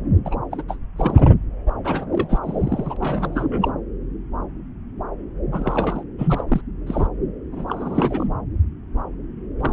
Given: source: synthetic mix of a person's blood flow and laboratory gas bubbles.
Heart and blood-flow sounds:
Doppler ultrasound of blood flow; subclavian vein
0.25-0.35 s: bubbles
0.51-0.62 s: bubbles
0.68-0.76 s: bubbles
0.96-1.30 s: bubbles
1.66-1.71 s: bubbles
1.84-2.39 s: bubbles
2.44-3.71 s: bubbles
5.52-6.04 s: bubbles
6.18-6.43 s: bubbles
6.48-6.61 s: bubbles
6.86-7.07 s: bubbles
7.52-8.27 s: bubbles
9.60-9.73 s: bubbles
From the record:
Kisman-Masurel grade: 332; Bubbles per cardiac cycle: rolling drumbeat, 9 or more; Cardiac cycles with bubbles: 50 to 99%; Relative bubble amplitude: moderate (0.250 to 0.450); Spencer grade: 3 (all of the cardiac periods contain showers or single bubble signals, but not dominating or overriding the cardiac motion signals); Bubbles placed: anywhere in the cardiac cycle

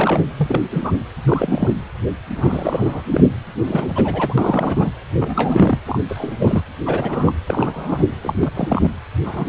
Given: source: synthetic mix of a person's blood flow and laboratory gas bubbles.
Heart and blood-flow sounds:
Doppler ultrasound of blood flow; precordium
0.00-0.26 s: bubbles
0.37-0.62 s: bubbles
0.71-0.93 s: bubbles
1.26-1.72 s: bubbles
2.35-3.02 s: bubbles
3.08-3.23 s: bubbles
3.67-4.34 s: bubbles
4.38-4.92 s: bubbles
5.18-5.78 s: bubbles
5.86-6.02 s: bubbles
6.08-6.61 s: bubbles
6.85-7.33 s: bubbles
7.47-8.04 s: bubbles
8.22-8.52 s: bubbles
8.54-8.89 s: bubbles
9.24-9.46 s: bubbles
From the record:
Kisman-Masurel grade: 232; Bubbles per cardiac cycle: several, 3 to 8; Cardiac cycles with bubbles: 50 to 99%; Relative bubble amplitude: moderate (0.250 to 0.450); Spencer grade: 3 (all of the cardiac periods contain showers or single bubble signals, but not dominating or overriding the cardiac motion signals); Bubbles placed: anywhere in the cardiac cycle

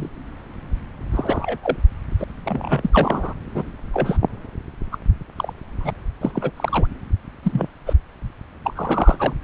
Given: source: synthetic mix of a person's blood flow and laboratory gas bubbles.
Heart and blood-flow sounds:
Doppler ultrasound of blood flow; subclavian vein
0.00-0.09 s: bubbles
1.11-1.57 s: bubbles
1.62-1.77 s: bubbles
2.19-2.24 s: bubbles
2.44-3.33 s: bubbles
3.54-3.63 s: bubbles
3.93-4.17 s: bubbles
4.92-4.97 s: bubbles
5.37-5.53 s: bubbles
5.77-5.91 s: bubbles
6.21-6.50 s: bubbles
6.56-6.87 s: bubbles
7.42-7.67 s: bubbles
7.86-7.93 s: bubbles
8.64-9.33 s: bubbles
From the record:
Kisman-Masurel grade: 242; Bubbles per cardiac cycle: several, 3 to 8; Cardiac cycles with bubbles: 100%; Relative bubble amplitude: moderate (0.250 to 0.450); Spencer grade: 3 (all of the cardiac periods contain showers or single bubble signals, but not dominating or overriding the cardiac motion signals); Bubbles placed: anywhere in the cardiac cycle

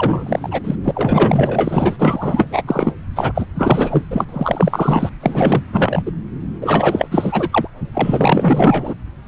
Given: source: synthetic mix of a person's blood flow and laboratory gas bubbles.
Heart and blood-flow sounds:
Doppler ultrasound of blood flow; subclavian vein
0.00-0.60 s: bubbles
0.64-0.75 s: bubbles
0.84-0.91 s: bubbles
0.94-1.96 s: bubbles
1.99-2.62 s: bubbles
2.67-2.94 s: bubbles
3.15-3.32 s: bubbles
3.34-3.46 s: bubbles
3.55-4.04 s: bubbles
4.10-4.25 s: bubbles
4.29-5.09 s: bubbles
5.20-5.63 s: bubbles
5.72-6.03 s: bubbles
6.05-6.12 s: bubbles
6.61-7.08 s: bubbles
7.10-7.49 s: bubbles
7.52-7.68 s: bubbles
7.91-8.94 s: bubbles
From the record:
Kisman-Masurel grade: 444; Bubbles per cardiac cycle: continuous sound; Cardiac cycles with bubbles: 100%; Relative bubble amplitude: maximal (0.775 to 0.999); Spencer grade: 4 (maximum detectable bubble signal sounding continuously throughout systole and diastole of every cardiac period, and overriding the amplitude of the normal cardiac signals); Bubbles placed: anywhere in the cardiac cycle

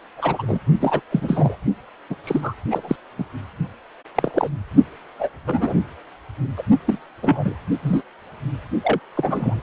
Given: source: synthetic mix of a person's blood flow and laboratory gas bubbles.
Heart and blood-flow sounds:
Doppler ultrasound of blood flow; precordium
0.17-0.58 s: bubbles
0.80-1.00 s: bubbles
1.11-1.56 s: bubbles
2.10-2.15 s: bubbles
2.24-2.54 s: bubbles
2.71-2.96 s: bubbles
3.18-3.25 s: bubbles
4.15-4.50 s: bubbles
5.19-5.29 s: bubbles
5.46-5.75 s: bubbles
6.56-6.62 s: bubbles
6.86-6.98 s: bubbles
7.22-7.55 s: bubbles
7.83-8.02 s: bubbles
8.84-9.00 s: bubbles
9.15-9.62 s: bubbles
From the record:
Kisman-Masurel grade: 242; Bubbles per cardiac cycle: several, 3 to 8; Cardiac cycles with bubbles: 100%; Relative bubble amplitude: moderate (0.250 to 0.450); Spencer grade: 3 (all of the cardiac periods contain showers or single bubble signals, but not dominating or overriding the cardiac motion signals); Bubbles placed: only in the low amplitude regions of the cardiac cycle

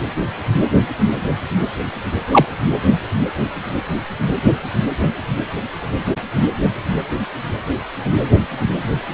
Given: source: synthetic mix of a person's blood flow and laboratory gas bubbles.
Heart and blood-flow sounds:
Doppler ultrasound of blood flow; precordium
2.31-2.45 s: bubbles
From the record:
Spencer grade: 1 (occasional bubble signal discernible with the cardiac motion signal, with majority of cardiac periods free of bubbles); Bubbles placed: anywhere in the cardiac cycle

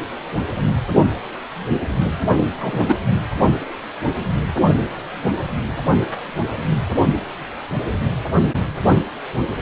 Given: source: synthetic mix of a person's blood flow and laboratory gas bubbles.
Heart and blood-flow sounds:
Doppler ultrasound of blood flow; precordium
2.60-2.84 s: bubbles
2.88-2.96 s: bubbles
From the record:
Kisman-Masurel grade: 123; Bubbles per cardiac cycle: 1 to 2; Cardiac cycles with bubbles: 10 to 50%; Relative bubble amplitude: loud (0.450 to 0.775); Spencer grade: 2 (many but less than half of the cardiac periods contain bubble signals, singularly or in groups); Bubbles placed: only in the low amplitude regions of the cardiac cycle

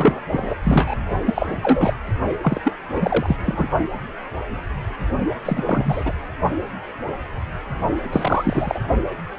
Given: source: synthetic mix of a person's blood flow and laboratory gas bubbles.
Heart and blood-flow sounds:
Doppler ultrasound of blood flow; precordium
0.00-0.21 s: bubbles
0.31-0.54 s: bubbles
0.64-0.96 s: bubbles
1.25-1.56 s: bubbles
1.62-1.94 s: bubbles
2.42-2.61 s: bubbles
2.64-2.74 s: bubbles
2.92-3.36 s: bubbles
3.44-3.68 s: bubbles
5.45-5.64 s: bubbles
5.67-6.14 s: bubbles
8.12-8.79 s: bubbles
From the record:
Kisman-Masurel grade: 333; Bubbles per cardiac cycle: rolling drumbeat, 9 or more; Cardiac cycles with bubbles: 50 to 99%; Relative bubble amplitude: loud (0.450 to 0.775); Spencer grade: 3 (all of the cardiac periods contain showers or single bubble signals, but not dominating or overriding the cardiac motion signals); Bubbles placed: only in the low amplitude regions of the cardiac cycle

